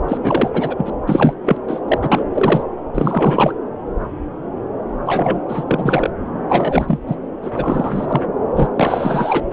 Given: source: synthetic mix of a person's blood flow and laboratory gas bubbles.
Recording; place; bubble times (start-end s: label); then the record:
Doppler ultrasound of blood flow; subclavian vein
0.08-0.17 s: bubbles
0.23-0.50 s: bubbles
0.53-0.90 s: bubbles
1.07-1.33 s: bubbles
1.42-1.57 s: bubbles
1.68-1.79 s: bubbles
1.88-1.98 s: bubbles
2.02-2.25 s: bubbles
2.34-2.63 s: bubbles
2.93-3.54 s: bubbles
5.06-5.40 s: bubbles
5.48-5.64 s: bubbles
5.67-6.10 s: bubbles
6.49-6.99 s: bubbles
7.07-7.15 s: bubbles
7.42-8.21 s: bubbles
8.56-8.68 s: bubbles
8.76-9.46 s: bubbles
9.51-9.53 s: bubbles
From the record:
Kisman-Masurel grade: 333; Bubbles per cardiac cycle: rolling drumbeat, 9 or more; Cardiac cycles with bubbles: 50 to 99%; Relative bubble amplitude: loud (0.450 to 0.775); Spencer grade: 3 (all of the cardiac periods contain showers or single bubble signals, but not dominating or overriding the cardiac motion signals); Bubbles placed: anywhere in the cardiac cycle